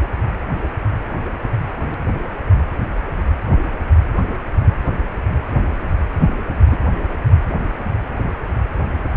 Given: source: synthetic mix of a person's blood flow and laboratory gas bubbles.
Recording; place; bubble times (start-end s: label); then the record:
Doppler ultrasound of blood flow; precordium
6.66-6.78 s: bubbles
From the record:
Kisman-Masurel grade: 112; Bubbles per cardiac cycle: 1 to 2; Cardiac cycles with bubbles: 1 to 10%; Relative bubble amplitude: moderate (0.250 to 0.450); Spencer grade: 1 (occasional bubble signal discernible with the cardiac motion signal, with majority of cardiac periods free of bubbles); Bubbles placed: anywhere in the cardiac cycle